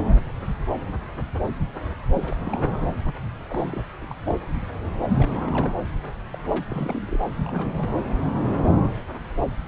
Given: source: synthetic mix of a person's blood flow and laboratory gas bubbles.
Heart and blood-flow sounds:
Doppler ultrasound of blood flow; subclavian vein
2.12-2.35 s: bubbles
2.45-2.70 s: bubbles
2.79-2.86 s: bubbles
3.05-3.15 s: bubbles
3.49-3.80 s: bubbles
4.01-4.15 s: bubbles
4.26-4.38 s: bubbles
5.17-5.74 s: bubbles
6.32-6.37 s: bubbles
6.49-6.63 s: bubbles
6.68-7.19 s: bubbles
7.36-7.92 s: bubbles
From the record:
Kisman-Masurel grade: 221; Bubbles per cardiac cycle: several, 3 to 8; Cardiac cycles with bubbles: 10 to 50%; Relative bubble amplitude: barely perceptible (0.100 to 0.250); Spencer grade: 2 (many but less than half of the cardiac periods contain bubble signals, singularly or in groups); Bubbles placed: anywhere in the cardiac cycle

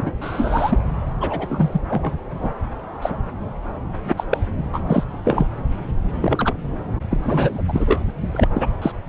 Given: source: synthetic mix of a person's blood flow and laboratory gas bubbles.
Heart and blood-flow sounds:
Doppler ultrasound of blood flow; subclavian vein
0.00-0.11 s: bubbles
0.21-0.79 s: bubbles
1.21-1.81 s: bubbles
1.89-2.13 s: bubbles
2.34-2.56 s: bubbles
3.01-3.17 s: bubbles
4.08-4.24 s: bubbles
4.29-4.38 s: bubbles
4.72-4.80 s: bubbles
4.89-5.04 s: bubbles
5.25-5.47 s: bubbles
6.21-6.54 s: bubbles
7.10-7.17 s: bubbles
7.25-7.62 s: bubbles
7.68-7.99 s: bubbles
8.32-8.47 s: bubbles
8.54-8.67 s: bubbles
8.81-8.92 s: bubbles
From the record:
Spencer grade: 3 (all of the cardiac periods contain showers or single bubble signals, but not dominating or overriding the cardiac motion signals); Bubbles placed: anywhere in the cardiac cycle

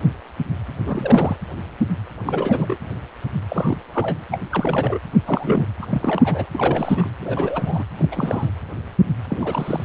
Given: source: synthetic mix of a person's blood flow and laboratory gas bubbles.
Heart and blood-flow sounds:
Doppler ultrasound of blood flow; precordium
0.80-1.36 s: bubbles
2.25-2.76 s: bubbles
3.48-3.78 s: bubbles
3.93-4.19 s: bubbles
4.31-4.38 s: bubbles
4.50-4.99 s: bubbles
5.25-5.67 s: bubbles
5.81-5.87 s: bubbles
5.91-7.10 s: bubbles
7.21-7.84 s: bubbles
7.99-8.51 s: bubbles
9.28-9.84 s: bubbles
From the record:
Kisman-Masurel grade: 332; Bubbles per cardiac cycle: rolling drumbeat, 9 or more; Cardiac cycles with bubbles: 50 to 99%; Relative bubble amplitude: moderate (0.250 to 0.450); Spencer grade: 3 (all of the cardiac periods contain showers or single bubble signals, but not dominating or overriding the cardiac motion signals); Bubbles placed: anywhere in the cardiac cycle

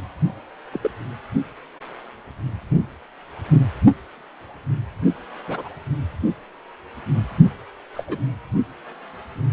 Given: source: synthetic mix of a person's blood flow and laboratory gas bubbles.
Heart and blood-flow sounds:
Doppler ultrasound of blood flow; precordium
0.73-0.91 s: bubbles
5.47-5.68 s: bubbles
7.94-8.04 s: bubbles
8.08-8.21 s: bubbles
From the record:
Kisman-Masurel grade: 121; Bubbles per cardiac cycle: 1 to 2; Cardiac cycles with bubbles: 10 to 50%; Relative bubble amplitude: barely perceptible (0.100 to 0.250); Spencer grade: 2 (many but less than half of the cardiac periods contain bubble signals, singularly or in groups); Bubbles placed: only in the low amplitude regions of the cardiac cycle

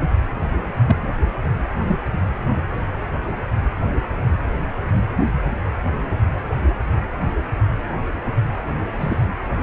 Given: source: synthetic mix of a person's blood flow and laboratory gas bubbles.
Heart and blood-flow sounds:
Doppler ultrasound of blood flow; precordium
0.02-0.09 s: bubbles
0.86-0.96 s: bubbles
1.88-1.99 s: bubbles
8.99-9.25 s: bubbles
From the record:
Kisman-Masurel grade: 122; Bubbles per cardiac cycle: 1 to 2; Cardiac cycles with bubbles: 10 to 50%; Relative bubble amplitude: moderate (0.250 to 0.450); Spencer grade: 2 (many but less than half of the cardiac periods contain bubble signals, singularly or in groups); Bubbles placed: anywhere in the cardiac cycle

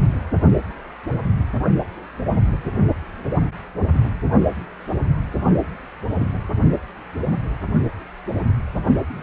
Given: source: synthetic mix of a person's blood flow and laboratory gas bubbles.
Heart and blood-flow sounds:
Doppler ultrasound of blood flow; precordium
9.14-9.22 s: bubbles
From the record:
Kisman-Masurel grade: 211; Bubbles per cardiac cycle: several, 3 to 8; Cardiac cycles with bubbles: 1 to 10%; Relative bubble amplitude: barely perceptible (0.100 to 0.250); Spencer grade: 1 (occasional bubble signal discernible with the cardiac motion signal, with majority of cardiac periods free of bubbles); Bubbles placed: only in the low amplitude regions of the cardiac cycle

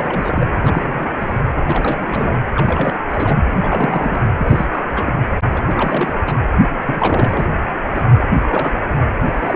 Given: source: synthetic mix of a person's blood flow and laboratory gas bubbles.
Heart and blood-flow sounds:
Doppler ultrasound of blood flow; precordium
0.00-0.52 s: bubbles
0.64-1.12 s: bubbles
1.19-1.40 s: bubbles
1.64-2.42 s: bubbles
2.54-2.99 s: bubbles
3.08-3.42 s: bubbles
3.58-4.23 s: bubbles
4.38-4.66 s: bubbles
4.71-4.87 s: bubbles
4.96-5.20 s: bubbles
5.50-6.16 s: bubbles
6.27-6.36 s: bubbles
6.85-7.48 s: bubbles
7.95-8.01 s: bubbles
8.18-8.22 s: bubbles
8.42-8.74 s: bubbles
8.92-9.03 s: bubbles
9.23-9.56 s: bubbles
From the record:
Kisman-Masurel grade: 342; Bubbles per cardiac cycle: rolling drumbeat, 9 or more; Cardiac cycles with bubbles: 100%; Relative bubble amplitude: moderate (0.250 to 0.450); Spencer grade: 3 (all of the cardiac periods contain showers or single bubble signals, but not dominating or overriding the cardiac motion signals); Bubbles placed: anywhere in the cardiac cycle

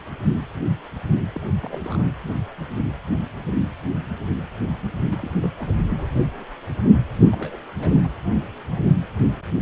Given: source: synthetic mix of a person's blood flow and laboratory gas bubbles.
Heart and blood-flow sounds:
Doppler ultrasound of blood flow; precordium
1.34-1.52 s: bubbles
1.61-2.08 s: bubbles
5.10-5.30 s: bubbles
5.43-5.48 s: bubbles
5.58-5.78 s: bubbles
5.83-6.06 s: bubbles
7.23-7.57 s: bubbles
7.79-8.00 s: bubbles
8.03-8.09 s: bubbles
From the record:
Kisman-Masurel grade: 221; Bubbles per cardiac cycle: several, 3 to 8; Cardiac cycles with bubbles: 10 to 50%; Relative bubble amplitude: barely perceptible (0.100 to 0.250); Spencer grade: 2 (many but less than half of the cardiac periods contain bubble signals, singularly or in groups); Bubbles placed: anywhere in the cardiac cycle

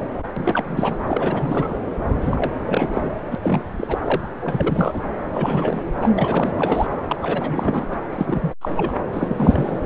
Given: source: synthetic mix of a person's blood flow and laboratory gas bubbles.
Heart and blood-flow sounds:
Doppler ultrasound of blood flow; subclavian vein
0.36-0.96 s: bubbles
1.06-1.75 s: bubbles
2.22-2.52 s: bubbles
2.66-3.13 s: bubbles
3.31-3.35 s: bubbles
3.42-3.62 s: bubbles
3.73-3.99 s: bubbles
4.04-4.28 s: bubbles
4.40-5.02 s: bubbles
5.34-5.82 s: bubbles
6.00-6.10 s: bubbles
6.17-6.87 s: bubbles
7.07-7.16 s: bubbles
7.21-8.00 s: bubbles
8.12-8.54 s: bubbles
8.61-8.71 s: bubbles
8.77-8.95 s: bubbles
9.13-9.79 s: bubbles
From the record:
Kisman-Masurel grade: 342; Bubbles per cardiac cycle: rolling drumbeat, 9 or more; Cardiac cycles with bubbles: 100%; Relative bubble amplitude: moderate (0.250 to 0.450); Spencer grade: 3 (all of the cardiac periods contain showers or single bubble signals, but not dominating or overriding the cardiac motion signals); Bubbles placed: anywhere in the cardiac cycle

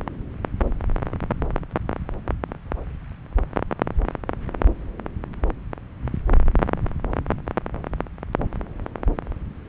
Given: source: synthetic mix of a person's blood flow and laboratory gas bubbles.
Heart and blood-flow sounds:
Doppler ultrasound of blood flow; subclavian vein
no bubbles
From the record:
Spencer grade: 0 (complete lack of bubble signals)

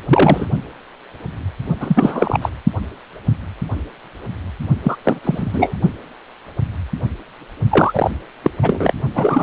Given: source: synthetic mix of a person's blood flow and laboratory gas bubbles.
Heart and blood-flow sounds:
Doppler ultrasound of blood flow; precordium
0.07-0.46 s: bubbles
1.80-2.38 s: bubbles
2.42-2.49 s: bubbles
4.83-4.96 s: bubbles
5.04-5.20 s: bubbles
5.24-5.76 s: bubbles
7.71-8.11 s: bubbles
8.42-8.50 s: bubbles
8.62-8.94 s: bubbles
9.14-9.43 s: bubbles
From the record:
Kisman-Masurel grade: 333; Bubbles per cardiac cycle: rolling drumbeat, 9 or more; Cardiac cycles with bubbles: 50 to 99%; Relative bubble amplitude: loud (0.450 to 0.775); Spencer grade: 3 (all of the cardiac periods contain showers or single bubble signals, but not dominating or overriding the cardiac motion signals); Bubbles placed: only in the low amplitude regions of the cardiac cycle

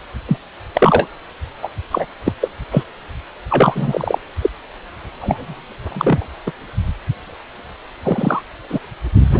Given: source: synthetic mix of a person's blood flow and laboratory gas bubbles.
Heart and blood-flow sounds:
Doppler ultrasound of blood flow; precordium
0.28-0.38 s: bubbles
0.74-1.07 s: bubbles
1.62-1.69 s: bubbles
1.91-2.06 s: bubbles
2.25-2.33 s: bubbles
2.40-2.51 s: bubbles
2.71-2.83 s: bubbles
3.49-4.19 s: bubbles
4.41-4.50 s: bubbles
5.19-5.63 s: bubbles
5.89-6.27 s: bubbles
6.46-6.52 s: bubbles
8.04-8.42 s: bubbles
8.70-8.79 s: bubbles
9.33-9.40 s: bubbles
From the record:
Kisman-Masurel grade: 243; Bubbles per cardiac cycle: several, 3 to 8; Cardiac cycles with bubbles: 100%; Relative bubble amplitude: loud (0.450 to 0.775); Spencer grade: 3 (all of the cardiac periods contain showers or single bubble signals, but not dominating or overriding the cardiac motion signals); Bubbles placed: only in the low amplitude regions of the cardiac cycle

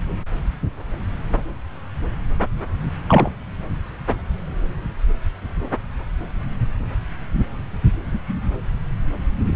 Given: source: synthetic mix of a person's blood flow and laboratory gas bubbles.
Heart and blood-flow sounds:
Doppler ultrasound of blood flow; subclavian vein
3.08-3.30 s: bubbles
From the record:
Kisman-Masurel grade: 113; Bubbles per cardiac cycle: 1 to 2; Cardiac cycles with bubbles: 1 to 10%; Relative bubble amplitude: loud (0.450 to 0.775); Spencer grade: 1 (occasional bubble signal discernible with the cardiac motion signal, with majority of cardiac periods free of bubbles); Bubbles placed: anywhere in the cardiac cycle

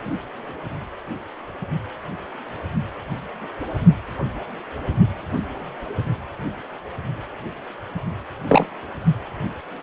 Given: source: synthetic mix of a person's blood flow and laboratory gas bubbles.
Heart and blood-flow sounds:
Doppler ultrasound of blood flow; precordium
8.48-8.66 s: bubbles
From the record:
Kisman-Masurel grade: 113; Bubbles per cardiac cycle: 1 to 2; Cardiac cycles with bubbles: 1 to 10%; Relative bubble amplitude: loud (0.450 to 0.775); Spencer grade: 1 (occasional bubble signal discernible with the cardiac motion signal, with majority of cardiac periods free of bubbles); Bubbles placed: only in the low amplitude regions of the cardiac cycle

